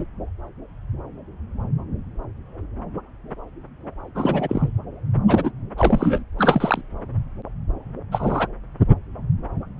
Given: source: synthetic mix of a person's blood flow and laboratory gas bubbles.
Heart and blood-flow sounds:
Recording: Doppler ultrasound of blood flow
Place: subclavian vein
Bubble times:
0.00-0.05 s: bubbles
4.15-4.71 s: bubbles
5.28-5.51 s: bubbles
5.78-6.24 s: bubbles
6.38-6.82 s: bubbles
8.12-8.47 s: bubbles
From the record:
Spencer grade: 2 (many but less than half of the cardiac periods contain bubble signals, singularly or in groups)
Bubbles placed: anywhere in the cardiac cycle

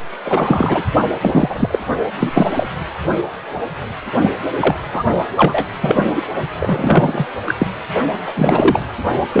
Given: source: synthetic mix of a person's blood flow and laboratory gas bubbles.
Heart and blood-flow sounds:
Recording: Doppler ultrasound of blood flow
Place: precordium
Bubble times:
0.24-0.84 s: bubbles
1.22-1.79 s: bubbles
2.19-2.46 s: bubbles
2.55-2.67 s: bubbles
4.21-4.30 s: bubbles
4.59-4.75 s: bubbles
4.92-5.04 s: bubbles
5.36-5.65 s: bubbles
5.81-6.06 s: bubbles
6.15-6.22 s: bubbles
6.60-7.26 s: bubbles
7.46-7.54 s: bubbles
7.59-7.67 s: bubbles
8.27-8.33 s: bubbles
8.36-8.79 s: bubbles
9.32-9.40 s: bubbles
From the record:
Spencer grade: 3 (all of the cardiac periods contain showers or single bubble signals, but not dominating or overriding the cardiac motion signals)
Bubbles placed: only in the low amplitude regions of the cardiac cycle

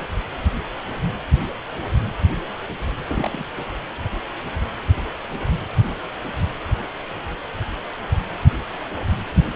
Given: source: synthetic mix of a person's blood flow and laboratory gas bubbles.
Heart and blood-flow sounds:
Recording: Doppler ultrasound of blood flow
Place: precordium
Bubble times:
3.08-3.29 s: bubbles
3.32-3.44 s: bubbles
From the record:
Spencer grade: 1 (occasional bubble signal discernible with the cardiac motion signal, with majority of cardiac periods free of bubbles)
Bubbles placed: anywhere in the cardiac cycle

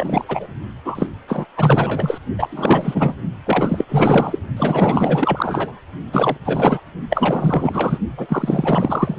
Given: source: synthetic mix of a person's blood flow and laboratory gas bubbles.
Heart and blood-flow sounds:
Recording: Doppler ultrasound of blood flow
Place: precordium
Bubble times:
0.00-0.25 s: bubbles
0.28-0.47 s: bubbles
0.85-1.07 s: bubbles
1.27-1.46 s: bubbles
1.56-2.18 s: bubbles
2.38-3.14 s: bubbles
3.46-3.85 s: bubbles
3.89-4.39 s: bubbles
4.57-5.79 s: bubbles
6.12-6.37 s: bubbles
6.45-6.80 s: bubbles
7.09-7.98 s: bubbles
8.17-9.16 s: bubbles
From the record:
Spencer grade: 4 (maximum detectable bubble signal sounding continuously throughout systole and diastole of every cardiac period, and overriding the amplitude of the normal cardiac signals)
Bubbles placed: only in the low amplitude regions of the cardiac cycle

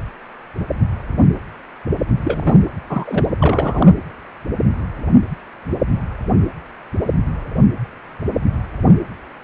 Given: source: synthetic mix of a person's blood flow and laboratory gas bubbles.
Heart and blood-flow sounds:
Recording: Doppler ultrasound of blood flow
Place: precordium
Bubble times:
2.23-2.56 s: bubbles
2.89-3.25 s: bubbles
3.39-3.95 s: bubbles
From the record:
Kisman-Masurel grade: 223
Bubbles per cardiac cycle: several, 3 to 8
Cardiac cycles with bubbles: 10 to 50%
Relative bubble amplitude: loud (0.450 to 0.775)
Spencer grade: 2 (many but less than half of the cardiac periods contain bubble signals, singularly or in groups)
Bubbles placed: anywhere in the cardiac cycle

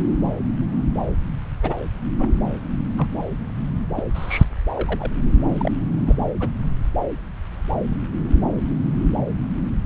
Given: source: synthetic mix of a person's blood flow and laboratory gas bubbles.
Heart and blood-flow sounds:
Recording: Doppler ultrasound of blood flow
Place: subclavian vein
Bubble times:
1.63-1.76 s: bubbles
2.19-2.29 s: bubbles
2.98-3.07 s: bubbles
3.96-4.03 s: bubbles
4.15-4.45 s: bubbles
4.76-5.11 s: bubbles
5.48-5.72 s: bubbles
6.06-6.16 s: bubbles
6.40-6.49 s: bubbles
7.91-7.96 s: bubbles
From the record:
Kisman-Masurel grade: 121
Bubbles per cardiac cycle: 1 to 2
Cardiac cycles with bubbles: 10 to 50%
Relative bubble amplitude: barely perceptible (0.100 to 0.250)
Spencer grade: 2 (many but less than half of the cardiac periods contain bubble signals, singularly or in groups)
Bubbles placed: anywhere in the cardiac cycle

